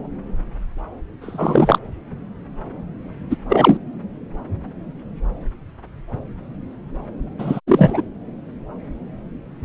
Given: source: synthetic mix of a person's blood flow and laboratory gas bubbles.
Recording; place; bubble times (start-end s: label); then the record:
Doppler ultrasound of blood flow; subclavian vein
1.21-1.78 s: bubbles
3.30-3.37 s: bubbles
3.49-3.77 s: bubbles
7.38-7.60 s: bubbles
7.67-8.01 s: bubbles
From the record:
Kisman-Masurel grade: 223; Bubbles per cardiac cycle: several, 3 to 8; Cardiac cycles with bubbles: 10 to 50%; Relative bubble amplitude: loud (0.450 to 0.775); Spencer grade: 2 (many but less than half of the cardiac periods contain bubble signals, singularly or in groups); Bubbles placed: anywhere in the cardiac cycle